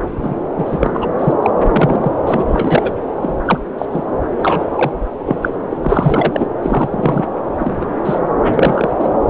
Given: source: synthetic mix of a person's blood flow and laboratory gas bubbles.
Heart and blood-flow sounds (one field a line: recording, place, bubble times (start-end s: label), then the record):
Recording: Doppler ultrasound of blood flow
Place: subclavian vein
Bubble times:
0.22-0.35 s: bubbles
0.58-0.91 s: bubbles
0.94-1.06 s: bubbles
1.19-1.33 s: bubbles
1.42-1.51 s: bubbles
1.61-2.11 s: bubbles
2.26-2.93 s: bubbles
3.21-3.35 s: bubbles
3.45-3.58 s: bubbles
3.78-3.85 s: bubbles
3.90-4.04 s: bubbles
4.42-4.64 s: bubbles
4.75-4.92 s: bubbles
5.26-5.36 s: bubbles
5.42-5.49 s: bubbles
5.70-5.77 s: bubbles
5.83-6.47 s: bubbles
6.62-6.88 s: bubbles
6.91-7.25 s: bubbles
7.59-7.86 s: bubbles
8.05-8.19 s: bubbles
8.43-8.90 s: bubbles
8.99-9.09 s: bubbles
From the record:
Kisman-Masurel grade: 243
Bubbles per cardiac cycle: several, 3 to 8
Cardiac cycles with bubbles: 100%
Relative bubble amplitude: loud (0.450 to 0.775)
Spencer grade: 3 (all of the cardiac periods contain showers or single bubble signals, but not dominating or overriding the cardiac motion signals)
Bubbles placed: anywhere in the cardiac cycle